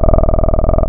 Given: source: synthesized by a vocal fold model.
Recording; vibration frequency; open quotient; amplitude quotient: sustained vowel; 20 Hz; 0.5; 1.4